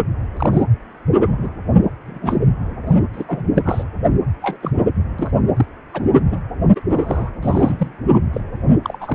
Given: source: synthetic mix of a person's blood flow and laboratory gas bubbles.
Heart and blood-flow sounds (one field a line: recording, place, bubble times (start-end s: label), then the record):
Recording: Doppler ultrasound of blood flow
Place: precordium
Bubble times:
0.37-0.50 s: bubbles
0.52-0.64 s: bubbles
1.26-1.49 s: bubbles
2.06-2.39 s: bubbles
2.85-2.96 s: bubbles
3.13-3.24 s: bubbles
3.27-3.43 s: bubbles
3.55-3.63 s: bubbles
3.65-3.84 s: bubbles
4.42-4.57 s: bubbles
4.62-4.72 s: bubbles
5.18-5.30 s: bubbles
5.56-5.65 s: bubbles
5.93-6.03 s: bubbles
6.14-6.21 s: bubbles
6.30-6.40 s: bubbles
6.75-6.80 s: bubbles
6.90-7.30 s: bubbles
7.40-7.92 s: bubbles
8.12-8.19 s: bubbles
8.33-8.41 s: bubbles
8.84-8.98 s: bubbles
9.01-9.15 s: bubbles
From the record:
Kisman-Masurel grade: 242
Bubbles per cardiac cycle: several, 3 to 8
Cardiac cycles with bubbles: 100%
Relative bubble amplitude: moderate (0.250 to 0.450)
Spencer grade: 3 (all of the cardiac periods contain showers or single bubble signals, but not dominating or overriding the cardiac motion signals)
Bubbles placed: anywhere in the cardiac cycle